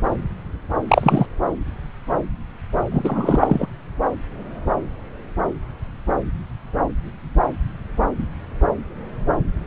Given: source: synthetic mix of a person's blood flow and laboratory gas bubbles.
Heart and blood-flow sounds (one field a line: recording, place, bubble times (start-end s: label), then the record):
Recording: Doppler ultrasound of blood flow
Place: subclavian vein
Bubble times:
0.87-1.27 s: bubbles
2.92-3.67 s: bubbles
From the record:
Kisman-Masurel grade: 213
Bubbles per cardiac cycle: several, 3 to 8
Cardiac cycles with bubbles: 1 to 10%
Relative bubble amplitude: loud (0.450 to 0.775)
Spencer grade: 1 (occasional bubble signal discernible with the cardiac motion signal, with majority of cardiac periods free of bubbles)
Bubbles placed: anywhere in the cardiac cycle